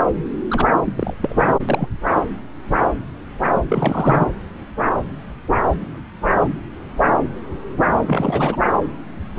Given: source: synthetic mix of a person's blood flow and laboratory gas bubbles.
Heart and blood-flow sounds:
Doppler ultrasound of blood flow; subclavian vein
0.49-0.67 s: bubbles
0.85-0.93 s: bubbles
0.95-1.14 s: bubbles
1.21-1.59 s: bubbles
1.68-1.89 s: bubbles
3.69-4.26 s: bubbles
8.06-8.56 s: bubbles
From the record:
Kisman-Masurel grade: 223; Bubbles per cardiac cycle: several, 3 to 8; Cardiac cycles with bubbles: 10 to 50%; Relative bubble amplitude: loud (0.450 to 0.775); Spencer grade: 2 (many but less than half of the cardiac periods contain bubble signals, singularly or in groups); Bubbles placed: anywhere in the cardiac cycle

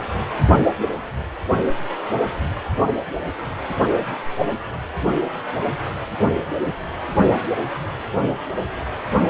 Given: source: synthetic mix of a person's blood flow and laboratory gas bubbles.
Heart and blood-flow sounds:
Doppler ultrasound of blood flow; precordium
no bubbles
From the record:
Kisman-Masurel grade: 000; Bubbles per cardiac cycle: 0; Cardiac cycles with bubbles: 0%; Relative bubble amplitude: no bubbles discernible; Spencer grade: 0 (complete lack of bubble signals)

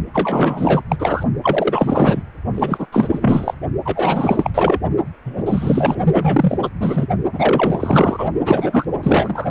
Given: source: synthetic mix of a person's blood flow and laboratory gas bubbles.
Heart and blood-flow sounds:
Doppler ultrasound of blood flow; precordium
0.13-0.83 s: bubbles
0.89-1.23 s: bubbles
1.43-2.23 s: bubbles
2.54-2.87 s: bubbles
2.92-3.54 s: bubbles
3.84-4.50 s: bubbles
4.54-4.79 s: bubbles
5.25-5.42 s: bubbles
5.46-6.58 s: bubbles
6.62-6.70 s: bubbles
6.80-7.06 s: bubbles
7.33-8.29 s: bubbles
8.45-8.85 s: bubbles
9.03-9.48 s: bubbles
From the record:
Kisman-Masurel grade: 444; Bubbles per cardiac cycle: continuous sound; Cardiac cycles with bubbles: 100%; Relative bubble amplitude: maximal (0.775 to 0.999); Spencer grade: 4 (maximum detectable bubble signal sounding continuously throughout systole and diastole of every cardiac period, and overriding the amplitude of the normal cardiac signals); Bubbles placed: only in the low amplitude regions of the cardiac cycle

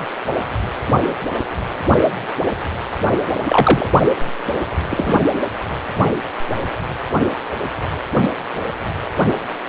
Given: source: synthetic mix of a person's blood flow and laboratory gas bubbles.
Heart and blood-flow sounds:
Doppler ultrasound of blood flow; precordium
0.00-0.04 s: bubbles
3.44-3.86 s: bubbles
4.91-5.20 s: bubbles
From the record:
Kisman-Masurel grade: 123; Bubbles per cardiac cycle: 1 to 2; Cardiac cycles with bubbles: 10 to 50%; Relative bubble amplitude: loud (0.450 to 0.775); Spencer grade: 2 (many but less than half of the cardiac periods contain bubble signals, singularly or in groups); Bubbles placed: anywhere in the cardiac cycle

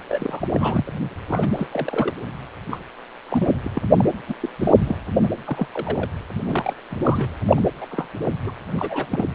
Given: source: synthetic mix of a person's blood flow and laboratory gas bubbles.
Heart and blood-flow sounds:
Doppler ultrasound of blood flow; precordium
0.09-0.48 s: bubbles
0.53-0.93 s: bubbles
1.30-1.52 s: bubbles
1.57-1.68 s: bubbles
1.72-2.13 s: bubbles
2.70-2.80 s: bubbles
3.29-3.48 s: bubbles
3.64-3.70 s: bubbles
3.74-3.82 s: bubbles
3.97-4.06 s: bubbles
4.28-4.35 s: bubbles
4.40-4.50 s: bubbles
4.59-4.72 s: bubbles
4.79-4.96 s: bubbles
5.23-5.29 s: bubbles
5.46-5.68 s: bubbles
5.74-6.10 s: bubbles
6.45-6.74 s: bubbles
6.90-7.29 s: bubbles
7.46-7.61 s: bubbles
7.81-7.86 s: bubbles
7.91-8.06 s: bubbles
8.44-8.52 s: bubbles
8.76-9.06 s: bubbles
9.10-9.25 s: bubbles
From the record:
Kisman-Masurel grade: 242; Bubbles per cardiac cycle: several, 3 to 8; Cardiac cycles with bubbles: 100%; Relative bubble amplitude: moderate (0.250 to 0.450); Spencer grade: 3 (all of the cardiac periods contain showers or single bubble signals, but not dominating or overriding the cardiac motion signals); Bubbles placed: anywhere in the cardiac cycle

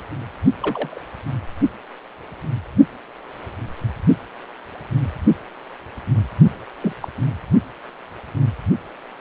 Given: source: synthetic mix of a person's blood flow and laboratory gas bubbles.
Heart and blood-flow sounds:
Doppler ultrasound of blood flow; precordium
0.59-1.02 s: bubbles
6.80-6.92 s: bubbles
7.02-7.08 s: bubbles
From the record:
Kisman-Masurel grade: 122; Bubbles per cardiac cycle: 1 to 2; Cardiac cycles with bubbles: 10 to 50%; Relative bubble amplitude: moderate (0.250 to 0.450); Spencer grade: 2 (many but less than half of the cardiac periods contain bubble signals, singularly or in groups); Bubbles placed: only in the low amplitude regions of the cardiac cycle

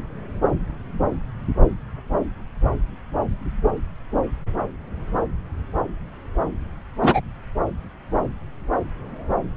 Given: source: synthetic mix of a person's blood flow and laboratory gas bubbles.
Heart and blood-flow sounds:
Doppler ultrasound of blood flow; subclavian vein
7.01-7.21 s: bubbles
From the record:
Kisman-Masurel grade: 113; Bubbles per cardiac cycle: 1 to 2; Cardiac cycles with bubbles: 1 to 10%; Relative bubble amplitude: loud (0.450 to 0.775); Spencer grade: 1 (occasional bubble signal discernible with the cardiac motion signal, with majority of cardiac periods free of bubbles); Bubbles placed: anywhere in the cardiac cycle

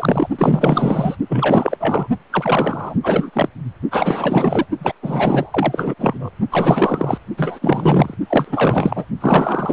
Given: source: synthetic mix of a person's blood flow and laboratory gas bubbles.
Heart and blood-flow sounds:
Doppler ultrasound of blood flow; precordium
0.00-0.29 s: bubbles
0.39-1.16 s: bubbles
1.29-1.76 s: bubbles
1.79-2.07 s: bubbles
2.30-2.95 s: bubbles
3.03-3.30 s: bubbles
3.32-3.49 s: bubbles
3.91-4.66 s: bubbles
4.80-4.92 s: bubbles
5.02-5.94 s: bubbles
5.99-6.31 s: bubbles
6.50-7.18 s: bubbles
7.37-8.14 s: bubbles
8.29-9.05 s: bubbles
9.21-9.73 s: bubbles
From the record:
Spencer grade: 4 (maximum detectable bubble signal sounding continuously throughout systole and diastole of every cardiac period, and overriding the amplitude of the normal cardiac signals); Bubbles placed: only in the low amplitude regions of the cardiac cycle

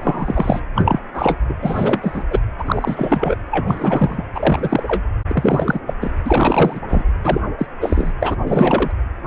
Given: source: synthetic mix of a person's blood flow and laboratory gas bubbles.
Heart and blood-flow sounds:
Doppler ultrasound of blood flow; precordium
0.00-0.61 s: bubbles
0.76-1.00 s: bubbles
1.13-1.38 s: bubbles
1.48-1.54 s: bubbles
1.62-2.23 s: bubbles
2.31-2.40 s: bubbles
2.58-3.36 s: bubbles
3.50-4.24 s: bubbles
4.34-5.02 s: bubbles
5.27-5.80 s: bubbles
5.86-5.94 s: bubbles
6.01-6.11 s: bubbles
6.25-6.80 s: bubbles
6.88-7.04 s: bubbles
7.23-7.41 s: bubbles
7.58-7.66 s: bubbles
7.81-8.12 s: bubbles
8.20-8.36 s: bubbles
8.46-8.91 s: bubbles
From the record:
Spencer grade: 3 (all of the cardiac periods contain showers or single bubble signals, but not dominating or overriding the cardiac motion signals); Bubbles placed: anywhere in the cardiac cycle

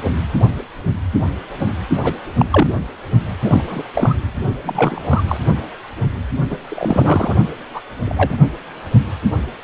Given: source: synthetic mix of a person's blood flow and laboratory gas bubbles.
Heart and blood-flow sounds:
Doppler ultrasound of blood flow; precordium
2.03-2.15 s: bubbles
2.38-2.46 s: bubbles
2.51-2.74 s: bubbles
3.41-3.64 s: bubbles
3.69-3.83 s: bubbles
3.94-4.15 s: bubbles
4.65-5.24 s: bubbles
5.27-5.37 s: bubbles
6.50-6.57 s: bubbles
6.68-7.35 s: bubbles
7.74-7.80 s: bubbles
8.05-8.37 s: bubbles
From the record:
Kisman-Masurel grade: 223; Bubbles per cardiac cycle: several, 3 to 8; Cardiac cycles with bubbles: 10 to 50%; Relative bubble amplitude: loud (0.450 to 0.775); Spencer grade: 2 (many but less than half of the cardiac periods contain bubble signals, singularly or in groups); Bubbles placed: only in the low amplitude regions of the cardiac cycle

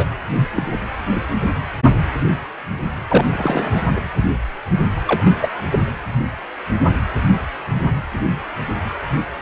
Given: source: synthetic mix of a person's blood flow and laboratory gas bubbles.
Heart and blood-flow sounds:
Doppler ultrasound of blood flow; precordium
0.00-0.05 s: bubbles
0.33-0.48 s: bubbles
0.55-0.64 s: bubbles
0.70-0.78 s: bubbles
3.08-3.25 s: bubbles
3.32-3.83 s: bubbles
3.94-4.01 s: bubbles
5.07-5.31 s: bubbles
5.41-5.48 s: bubbles
5.71-5.79 s: bubbles
From the record:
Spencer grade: 2 (many but less than half of the cardiac periods contain bubble signals, singularly or in groups); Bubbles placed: anywhere in the cardiac cycle

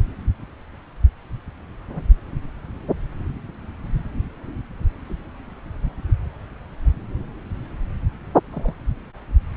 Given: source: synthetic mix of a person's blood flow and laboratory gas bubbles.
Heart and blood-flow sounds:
Doppler ultrasound of blood flow; subclavian vein
1.93-2.03 s: bubbles
8.52-8.75 s: bubbles
From the record:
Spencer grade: 2 (many but less than half of the cardiac periods contain bubble signals, singularly or in groups); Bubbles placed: anywhere in the cardiac cycle

